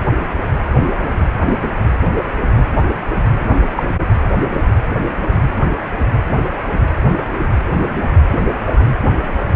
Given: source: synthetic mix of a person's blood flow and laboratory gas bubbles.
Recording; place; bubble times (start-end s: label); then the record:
Doppler ultrasound of blood flow; precordium
3.76-3.83 s: bubbles
From the record:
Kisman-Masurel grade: 113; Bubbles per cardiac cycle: 1 to 2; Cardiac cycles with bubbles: 1 to 10%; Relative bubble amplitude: loud (0.450 to 0.775); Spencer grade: 1 (occasional bubble signal discernible with the cardiac motion signal, with majority of cardiac periods free of bubbles); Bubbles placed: anywhere in the cardiac cycle